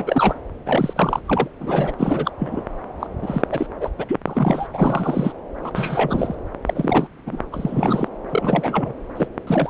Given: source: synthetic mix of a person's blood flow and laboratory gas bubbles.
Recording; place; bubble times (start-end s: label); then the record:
Doppler ultrasound of blood flow; subclavian vein
0.00-0.34 s: bubbles
0.66-1.20 s: bubbles
1.26-1.48 s: bubbles
1.60-1.94 s: bubbles
1.98-2.31 s: bubbles
2.39-2.63 s: bubbles
2.99-3.07 s: bubbles
3.22-3.42 s: bubbles
3.50-3.67 s: bubbles
3.81-3.90 s: bubbles
3.98-4.05 s: bubbles
4.08-4.19 s: bubbles
4.27-4.68 s: bubbles
4.72-5.33 s: bubbles
5.62-5.71 s: bubbles
5.75-6.35 s: bubbles
6.66-7.08 s: bubbles
7.26-7.43 s: bubbles
7.52-8.07 s: bubbles
8.29-8.94 s: bubbles
9.17-9.28 s: bubbles
9.47-9.70 s: bubbles
From the record:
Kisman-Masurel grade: 342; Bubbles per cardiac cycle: rolling drumbeat, 9 or more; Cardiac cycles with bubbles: 100%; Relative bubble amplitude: moderate (0.250 to 0.450); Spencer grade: 3 (all of the cardiac periods contain showers or single bubble signals, but not dominating or overriding the cardiac motion signals); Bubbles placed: anywhere in the cardiac cycle